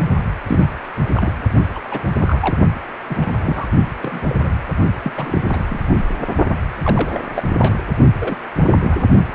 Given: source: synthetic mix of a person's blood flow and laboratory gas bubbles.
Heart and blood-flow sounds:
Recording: Doppler ultrasound of blood flow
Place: precordium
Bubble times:
0.48-0.68 s: bubbles
1.14-1.32 s: bubbles
1.75-1.79 s: bubbles
1.91-2.02 s: bubbles
2.20-2.57 s: bubbles
3.10-3.67 s: bubbles
4.01-4.20 s: bubbles
4.29-4.36 s: bubbles
4.43-4.51 s: bubbles
5.03-5.12 s: bubbles
5.15-5.67 s: bubbles
5.69-6.03 s: bubbles
6.50-6.54 s: bubbles
6.82-7.20 s: bubbles
7.34-7.43 s: bubbles
7.59-7.77 s: bubbles
8.19-8.36 s: bubbles
8.61-9.05 s: bubbles
From the record:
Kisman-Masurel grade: 232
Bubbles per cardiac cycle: several, 3 to 8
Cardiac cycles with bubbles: 50 to 99%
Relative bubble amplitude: moderate (0.250 to 0.450)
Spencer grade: 3 (all of the cardiac periods contain showers or single bubble signals, but not dominating or overriding the cardiac motion signals)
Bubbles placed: only in the low amplitude regions of the cardiac cycle

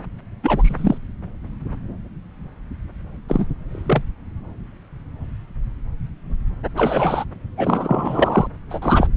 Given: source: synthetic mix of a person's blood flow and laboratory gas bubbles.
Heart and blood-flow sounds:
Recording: Doppler ultrasound of blood flow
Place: subclavian vein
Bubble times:
0.43-0.98 s: bubbles
3.28-3.46 s: bubbles
3.71-4.05 s: bubbles
6.76-7.25 s: bubbles
7.57-8.47 s: bubbles
8.70-8.79 s: bubbles
8.82-9.07 s: bubbles
From the record:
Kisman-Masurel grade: 223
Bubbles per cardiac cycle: several, 3 to 8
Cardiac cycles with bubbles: 10 to 50%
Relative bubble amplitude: loud (0.450 to 0.775)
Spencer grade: 2 (many but less than half of the cardiac periods contain bubble signals, singularly or in groups)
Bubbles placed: anywhere in the cardiac cycle

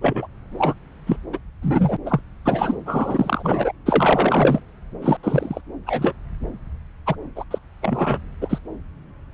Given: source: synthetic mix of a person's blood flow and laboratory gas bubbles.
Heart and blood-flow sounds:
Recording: Doppler ultrasound of blood flow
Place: subclavian vein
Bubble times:
0.01-0.27 s: bubbles
0.58-0.74 s: bubbles
1.07-1.17 s: bubbles
1.33-1.38 s: bubbles
1.62-1.96 s: bubbles
2.06-2.20 s: bubbles
2.45-2.75 s: bubbles
2.85-3.72 s: bubbles
3.86-4.61 s: bubbles
5.01-5.17 s: bubbles
5.23-5.61 s: bubbles
5.87-6.13 s: bubbles
7.06-7.16 s: bubbles
7.36-7.44 s: bubbles
7.50-7.58 s: bubbles
7.81-8.18 s: bubbles
8.42-8.59 s: bubbles
From the record:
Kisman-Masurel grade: 242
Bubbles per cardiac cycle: several, 3 to 8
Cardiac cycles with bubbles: 100%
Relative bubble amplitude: moderate (0.250 to 0.450)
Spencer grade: 3 (all of the cardiac periods contain showers or single bubble signals, but not dominating or overriding the cardiac motion signals)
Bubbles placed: anywhere in the cardiac cycle

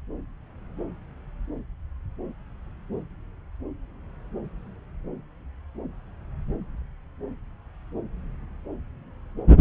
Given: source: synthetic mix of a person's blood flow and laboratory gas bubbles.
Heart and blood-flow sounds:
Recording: Doppler ultrasound of blood flow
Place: subclavian vein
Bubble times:
no bubbles
From the record:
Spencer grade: 0 (complete lack of bubble signals)

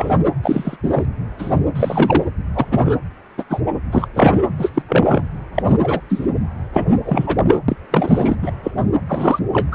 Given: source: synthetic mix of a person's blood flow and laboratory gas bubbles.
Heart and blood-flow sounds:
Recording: Doppler ultrasound of blood flow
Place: precordium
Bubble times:
0.00-0.17 s: bubbles
0.42-0.76 s: bubbles
0.83-1.06 s: bubbles
1.39-1.56 s: bubbles
1.75-2.24 s: bubbles
2.54-2.66 s: bubbles
2.70-2.97 s: bubbles
3.38-3.44 s: bubbles
3.49-3.61 s: bubbles
3.91-4.08 s: bubbles
4.14-4.37 s: bubbles
4.58-4.71 s: bubbles
4.74-4.82 s: bubbles
4.89-5.23 s: bubbles
5.54-5.62 s: bubbles
5.67-5.77 s: bubbles
5.82-6.00 s: bubbles
6.09-6.28 s: bubbles
6.73-6.86 s: bubbles
7.05-7.37 s: bubbles
7.47-7.57 s: bubbles
7.68-7.76 s: bubbles
7.91-8.36 s: bubbles
8.42-8.52 s: bubbles
8.63-8.71 s: bubbles
9.09-9.39 s: bubbles
9.53-9.68 s: bubbles
9.71-9.75 s: bubbles
From the record:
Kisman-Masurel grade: 243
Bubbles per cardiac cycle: several, 3 to 8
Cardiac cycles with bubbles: 100%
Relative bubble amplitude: loud (0.450 to 0.775)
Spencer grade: 3 (all of the cardiac periods contain showers or single bubble signals, but not dominating or overriding the cardiac motion signals)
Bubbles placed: anywhere in the cardiac cycle

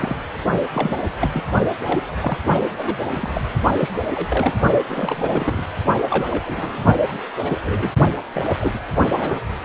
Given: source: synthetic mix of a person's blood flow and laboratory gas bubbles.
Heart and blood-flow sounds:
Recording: Doppler ultrasound of blood flow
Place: precordium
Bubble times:
0.00-0.16 s: bubbles
0.73-0.95 s: bubbles
1.19-1.47 s: bubbles
1.86-2.00 s: bubbles
2.20-2.38 s: bubbles
2.77-2.98 s: bubbles
3.13-3.41 s: bubbles
3.79-3.92 s: bubbles
4.14-4.54 s: bubbles
4.88-5.63 s: bubbles
6.09-6.26 s: bubbles
6.30-6.43 s: bubbles
6.46-6.83 s: bubbles
7.08-7.21 s: bubbles
7.39-7.62 s: bubbles
7.64-7.92 s: bubbles
8.33-8.53 s: bubbles
8.61-8.79 s: bubbles
9.11-9.40 s: bubbles
From the record:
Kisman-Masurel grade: 242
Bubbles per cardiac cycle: several, 3 to 8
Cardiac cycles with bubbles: 100%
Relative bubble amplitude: moderate (0.250 to 0.450)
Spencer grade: 3 (all of the cardiac periods contain showers or single bubble signals, but not dominating or overriding the cardiac motion signals)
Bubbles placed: only in the low amplitude regions of the cardiac cycle

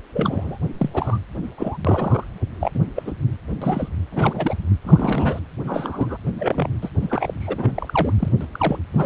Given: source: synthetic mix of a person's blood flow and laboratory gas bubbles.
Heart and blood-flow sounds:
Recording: Doppler ultrasound of blood flow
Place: precordium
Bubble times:
0.13-0.57 s: bubbles
0.77-0.90 s: bubbles
0.94-1.18 s: bubbles
1.58-1.77 s: bubbles
1.85-2.24 s: bubbles
2.60-2.71 s: bubbles
2.74-2.80 s: bubbles
2.96-3.12 s: bubbles
3.62-3.89 s: bubbles
4.12-4.55 s: bubbles
4.84-5.39 s: bubbles
5.64-6.17 s: bubbles
6.38-6.68 s: bubbles
6.82-6.89 s: bubbles
7.01-7.34 s: bubbles
7.41-8.13 s: bubbles
8.19-8.29 s: bubbles
8.40-8.46 s: bubbles
8.52-8.79 s: bubbles
8.93-9.06 s: bubbles
From the record:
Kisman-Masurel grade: 242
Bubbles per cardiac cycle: several, 3 to 8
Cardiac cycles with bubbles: 100%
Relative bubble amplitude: moderate (0.250 to 0.450)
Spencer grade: 3 (all of the cardiac periods contain showers or single bubble signals, but not dominating or overriding the cardiac motion signals)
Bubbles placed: anywhere in the cardiac cycle

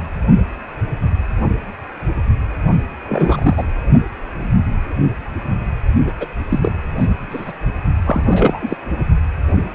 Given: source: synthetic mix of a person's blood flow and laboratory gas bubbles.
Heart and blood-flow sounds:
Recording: Doppler ultrasound of blood flow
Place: precordium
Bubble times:
3.08-3.63 s: bubbles
6.07-6.12 s: bubbles
6.20-6.28 s: bubbles
6.49-6.59 s: bubbles
6.62-6.74 s: bubbles
7.00-7.07 s: bubbles
7.30-7.53 s: bubbles
8.05-8.77 s: bubbles
From the record:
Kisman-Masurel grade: 222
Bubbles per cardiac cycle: several, 3 to 8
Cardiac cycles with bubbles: 10 to 50%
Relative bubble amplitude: moderate (0.250 to 0.450)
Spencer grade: 2 (many but less than half of the cardiac periods contain bubble signals, singularly or in groups)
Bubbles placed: only in the low amplitude regions of the cardiac cycle

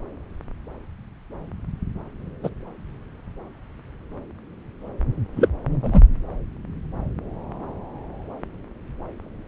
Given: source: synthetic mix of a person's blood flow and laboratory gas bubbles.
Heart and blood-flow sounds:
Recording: Doppler ultrasound of blood flow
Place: subclavian vein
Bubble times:
2.43-2.50 s: bubbles
5.36-5.48 s: bubbles
5.82-6.01 s: bubbles
From the record:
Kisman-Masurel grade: 123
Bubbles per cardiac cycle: 1 to 2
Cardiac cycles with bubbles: 10 to 50%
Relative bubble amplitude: loud (0.450 to 0.775)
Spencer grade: 2 (many but less than half of the cardiac periods contain bubble signals, singularly or in groups)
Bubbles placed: anywhere in the cardiac cycle

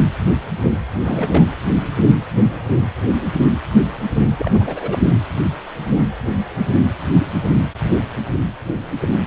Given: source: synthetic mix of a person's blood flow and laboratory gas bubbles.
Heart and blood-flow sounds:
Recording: Doppler ultrasound of blood flow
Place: precordium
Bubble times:
1.04-1.47 s: bubbles
4.37-4.98 s: bubbles
5.04-5.16 s: bubbles
From the record:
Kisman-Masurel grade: 222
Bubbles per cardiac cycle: several, 3 to 8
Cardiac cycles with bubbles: 10 to 50%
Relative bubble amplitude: moderate (0.250 to 0.450)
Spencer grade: 2 (many but less than half of the cardiac periods contain bubble signals, singularly or in groups)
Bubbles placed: anywhere in the cardiac cycle

